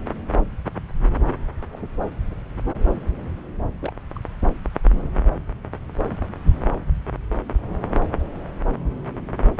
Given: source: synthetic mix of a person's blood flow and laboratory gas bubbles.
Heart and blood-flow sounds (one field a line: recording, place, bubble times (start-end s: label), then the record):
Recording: Doppler ultrasound of blood flow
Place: subclavian vein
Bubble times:
1.72-1.79 s: bubbles
3.80-3.93 s: bubbles
4.14-4.22 s: bubbles
From the record:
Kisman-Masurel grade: 121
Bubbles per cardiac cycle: 1 to 2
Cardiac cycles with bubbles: 10 to 50%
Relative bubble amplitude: barely perceptible (0.100 to 0.250)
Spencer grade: 2 (many but less than half of the cardiac periods contain bubble signals, singularly or in groups)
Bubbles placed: anywhere in the cardiac cycle